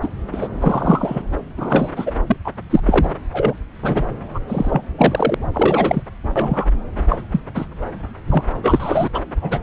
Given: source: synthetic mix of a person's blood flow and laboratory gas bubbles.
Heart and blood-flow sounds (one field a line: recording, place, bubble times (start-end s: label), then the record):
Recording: Doppler ultrasound of blood flow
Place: subclavian vein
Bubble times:
0.02-0.09 s: bubbles
0.32-0.48 s: bubbles
0.60-1.23 s: bubbles
1.57-1.91 s: bubbles
1.96-2.12 s: bubbles
2.26-2.37 s: bubbles
2.45-2.54 s: bubbles
2.70-2.80 s: bubbles
2.86-3.11 s: bubbles
3.32-3.54 s: bubbles
3.82-4.04 s: bubbles
4.34-4.40 s: bubbles
4.48-4.82 s: bubbles
4.98-5.35 s: bubbles
5.54-6.03 s: bubbles
6.36-6.70 s: bubbles
7.09-7.21 s: bubbles
7.32-7.40 s: bubbles
7.54-7.66 s: bubbles
8.29-8.43 s: bubbles
8.62-9.09 s: bubbles
9.14-9.21 s: bubbles
9.42-9.59 s: bubbles
From the record:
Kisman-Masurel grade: 243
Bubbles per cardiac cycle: several, 3 to 8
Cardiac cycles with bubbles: 100%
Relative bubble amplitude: loud (0.450 to 0.775)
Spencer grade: 3 (all of the cardiac periods contain showers or single bubble signals, but not dominating or overriding the cardiac motion signals)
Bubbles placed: anywhere in the cardiac cycle